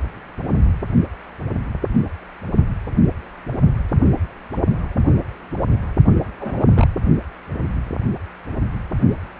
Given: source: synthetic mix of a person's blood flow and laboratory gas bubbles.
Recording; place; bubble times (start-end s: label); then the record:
Doppler ultrasound of blood flow; precordium
6.40-6.67 s: bubbles
6.74-6.86 s: bubbles
From the record:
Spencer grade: 1 (occasional bubble signal discernible with the cardiac motion signal, with majority of cardiac periods free of bubbles); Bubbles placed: only in the low amplitude regions of the cardiac cycle